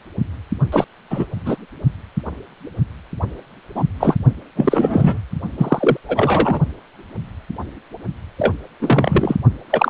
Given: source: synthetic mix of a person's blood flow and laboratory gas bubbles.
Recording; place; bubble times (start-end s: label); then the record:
Doppler ultrasound of blood flow; precordium
0.72-0.84 s: bubbles
1.10-1.26 s: bubbles
1.45-1.57 s: bubbles
3.75-3.84 s: bubbles
3.99-4.17 s: bubbles
4.56-5.19 s: bubbles
5.58-5.97 s: bubbles
6.08-6.60 s: bubbles
8.38-8.55 s: bubbles
8.80-9.35 s: bubbles
9.70-9.90 s: bubbles
From the record:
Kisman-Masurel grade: 233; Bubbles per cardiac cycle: several, 3 to 8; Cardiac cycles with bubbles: 50 to 99%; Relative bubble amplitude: loud (0.450 to 0.775); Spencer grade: 3 (all of the cardiac periods contain showers or single bubble signals, but not dominating or overriding the cardiac motion signals); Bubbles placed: only in the low amplitude regions of the cardiac cycle